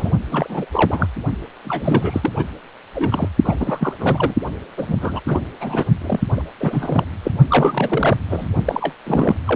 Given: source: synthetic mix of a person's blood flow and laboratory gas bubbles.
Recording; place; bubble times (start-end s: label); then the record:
Doppler ultrasound of blood flow; precordium
0.00-0.12 s: bubbles
0.32-0.66 s: bubbles
0.71-1.06 s: bubbles
1.65-2.32 s: bubbles
2.36-2.44 s: bubbles
2.95-3.29 s: bubbles
3.44-3.55 s: bubbles
3.60-3.93 s: bubbles
4.00-4.34 s: bubbles
4.77-4.95 s: bubbles
5.00-5.21 s: bubbles
5.27-5.41 s: bubbles
5.60-5.85 s: bubbles
6.02-6.20 s: bubbles
6.37-6.42 s: bubbles
6.60-7.04 s: bubbles
7.24-7.32 s: bubbles
7.49-8.17 s: bubbles
8.30-8.46 s: bubbles
8.65-8.93 s: bubbles
9.06-9.36 s: bubbles
9.46-9.56 s: bubbles
From the record:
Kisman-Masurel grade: 332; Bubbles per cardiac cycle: rolling drumbeat, 9 or more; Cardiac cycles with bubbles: 50 to 99%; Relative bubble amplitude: moderate (0.250 to 0.450); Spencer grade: 3 (all of the cardiac periods contain showers or single bubble signals, but not dominating or overriding the cardiac motion signals); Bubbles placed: only in the low amplitude regions of the cardiac cycle